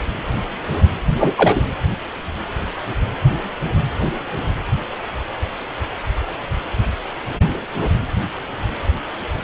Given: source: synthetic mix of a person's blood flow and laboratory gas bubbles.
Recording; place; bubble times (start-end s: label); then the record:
Doppler ultrasound of blood flow; precordium
1.18-1.62 s: bubbles
From the record:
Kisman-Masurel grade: 213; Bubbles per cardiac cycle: several, 3 to 8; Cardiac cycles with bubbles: 1 to 10%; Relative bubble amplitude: loud (0.450 to 0.775); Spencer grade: 1 (occasional bubble signal discernible with the cardiac motion signal, with majority of cardiac periods free of bubbles); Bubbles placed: anywhere in the cardiac cycle